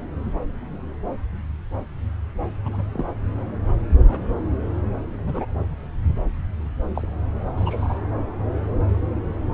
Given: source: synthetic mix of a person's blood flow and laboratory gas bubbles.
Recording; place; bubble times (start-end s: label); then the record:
Doppler ultrasound of blood flow; subclavian vein
2.65-2.82 s: bubbles
2.92-3.05 s: bubbles
4.00-4.23 s: bubbles
5.26-5.46 s: bubbles
6.95-7.06 s: bubbles
7.56-7.98 s: bubbles
From the record:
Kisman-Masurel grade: 121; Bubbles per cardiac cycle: 1 to 2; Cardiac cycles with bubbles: 10 to 50%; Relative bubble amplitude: barely perceptible (0.100 to 0.250); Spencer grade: 2 (many but less than half of the cardiac periods contain bubble signals, singularly or in groups); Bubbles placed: anywhere in the cardiac cycle